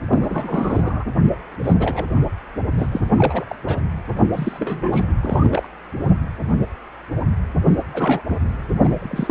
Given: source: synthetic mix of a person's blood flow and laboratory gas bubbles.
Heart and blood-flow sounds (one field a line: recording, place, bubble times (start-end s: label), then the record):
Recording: Doppler ultrasound of blood flow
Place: precordium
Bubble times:
0.10-1.04 s: bubbles
1.64-1.74 s: bubbles
1.79-2.05 s: bubbles
2.77-3.00 s: bubbles
3.16-3.55 s: bubbles
3.65-3.81 s: bubbles
4.33-5.04 s: bubbles
5.22-5.69 s: bubbles
7.93-8.21 s: bubbles
8.29-8.38 s: bubbles
8.83-9.31 s: bubbles
From the record:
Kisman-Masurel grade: 232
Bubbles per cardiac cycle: several, 3 to 8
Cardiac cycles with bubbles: 50 to 99%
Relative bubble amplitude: moderate (0.250 to 0.450)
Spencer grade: 3 (all of the cardiac periods contain showers or single bubble signals, but not dominating or overriding the cardiac motion signals)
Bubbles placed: anywhere in the cardiac cycle